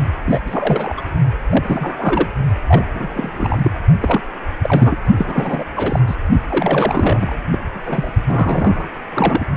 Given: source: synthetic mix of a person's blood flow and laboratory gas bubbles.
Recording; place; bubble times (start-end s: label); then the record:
Doppler ultrasound of blood flow; precordium
0.25-0.41 s: bubbles
0.45-0.94 s: bubbles
0.96-1.04 s: bubbles
1.46-2.27 s: bubbles
2.67-2.84 s: bubbles
2.94-3.71 s: bubbles
4.01-4.21 s: bubbles
4.62-4.96 s: bubbles
5.17-5.65 s: bubbles
5.76-6.00 s: bubbles
6.07-6.16 s: bubbles
6.49-7.38 s: bubbles
7.52-7.58 s: bubbles
7.73-8.11 s: bubbles
8.26-8.89 s: bubbles
9.14-9.45 s: bubbles
From the record:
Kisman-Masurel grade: 332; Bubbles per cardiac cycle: rolling drumbeat, 9 or more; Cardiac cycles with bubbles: 50 to 99%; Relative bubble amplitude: moderate (0.250 to 0.450); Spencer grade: 3 (all of the cardiac periods contain showers or single bubble signals, but not dominating or overriding the cardiac motion signals); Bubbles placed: only in the low amplitude regions of the cardiac cycle